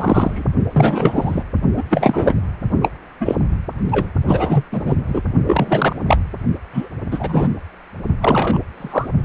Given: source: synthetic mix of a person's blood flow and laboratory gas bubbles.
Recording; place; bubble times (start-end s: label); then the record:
Doppler ultrasound of blood flow; precordium
0.00-0.48 s: bubbles
0.73-1.43 s: bubbles
1.76-1.84 s: bubbles
1.89-2.34 s: bubbles
2.82-2.90 s: bubbles
3.20-3.35 s: bubbles
3.91-4.11 s: bubbles
4.27-4.64 s: bubbles
4.72-4.96 s: bubbles
5.08-5.21 s: bubbles
5.46-5.96 s: bubbles
6.07-6.17 s: bubbles
6.73-6.89 s: bubbles
7.11-7.49 s: bubbles
8.21-8.59 s: bubbles
8.77-9.09 s: bubbles
From the record:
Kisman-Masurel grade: 243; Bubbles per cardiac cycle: several, 3 to 8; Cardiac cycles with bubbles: 100%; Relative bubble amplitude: loud (0.450 to 0.775); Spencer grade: 3 (all of the cardiac periods contain showers or single bubble signals, but not dominating or overriding the cardiac motion signals); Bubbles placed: only in the low amplitude regions of the cardiac cycle